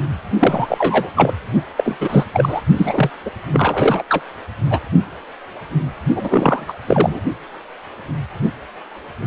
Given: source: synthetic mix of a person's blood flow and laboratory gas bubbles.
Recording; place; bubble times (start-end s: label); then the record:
Doppler ultrasound of blood flow; precordium
0.39-1.10 s: bubbles
1.16-1.33 s: bubbles
1.77-1.97 s: bubbles
2.00-2.24 s: bubbles
2.33-2.62 s: bubbles
2.76-3.10 s: bubbles
3.25-3.30 s: bubbles
3.52-4.03 s: bubbles
4.09-4.23 s: bubbles
4.70-4.79 s: bubbles
6.15-6.73 s: bubbles
6.87-7.20 s: bubbles
From the record:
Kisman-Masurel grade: 333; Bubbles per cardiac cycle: rolling drumbeat, 9 or more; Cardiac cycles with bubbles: 50 to 99%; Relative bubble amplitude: loud (0.450 to 0.775); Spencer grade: 3 (all of the cardiac periods contain showers or single bubble signals, but not dominating or overriding the cardiac motion signals); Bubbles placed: only in the low amplitude regions of the cardiac cycle